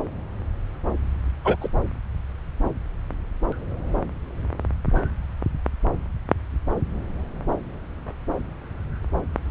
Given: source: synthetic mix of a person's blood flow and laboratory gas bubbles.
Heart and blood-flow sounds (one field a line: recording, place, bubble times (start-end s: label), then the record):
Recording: Doppler ultrasound of blood flow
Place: subclavian vein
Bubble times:
1.44-1.56 s: bubbles
1.60-1.69 s: bubbles
From the record:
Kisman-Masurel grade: 113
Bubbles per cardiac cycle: 1 to 2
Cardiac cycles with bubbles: 1 to 10%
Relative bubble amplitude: loud (0.450 to 0.775)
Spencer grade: 1 (occasional bubble signal discernible with the cardiac motion signal, with majority of cardiac periods free of bubbles)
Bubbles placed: anywhere in the cardiac cycle